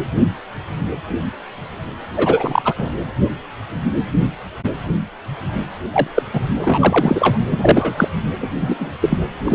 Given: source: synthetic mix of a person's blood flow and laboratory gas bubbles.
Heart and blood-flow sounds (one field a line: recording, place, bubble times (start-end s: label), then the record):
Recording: Doppler ultrasound of blood flow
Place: precordium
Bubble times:
2.17-2.61 s: bubbles
2.65-2.73 s: bubbles
2.78-2.89 s: bubbles
5.93-6.07 s: bubbles
6.15-6.22 s: bubbles
6.33-6.41 s: bubbles
6.62-7.38 s: bubbles
7.51-8.09 s: bubbles
8.40-8.93 s: bubbles
9.02-9.18 s: bubbles
9.45-9.55 s: bubbles
From the record:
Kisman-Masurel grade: 233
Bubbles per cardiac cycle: several, 3 to 8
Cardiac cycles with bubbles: 50 to 99%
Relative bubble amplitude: loud (0.450 to 0.775)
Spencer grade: 3 (all of the cardiac periods contain showers or single bubble signals, but not dominating or overriding the cardiac motion signals)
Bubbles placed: anywhere in the cardiac cycle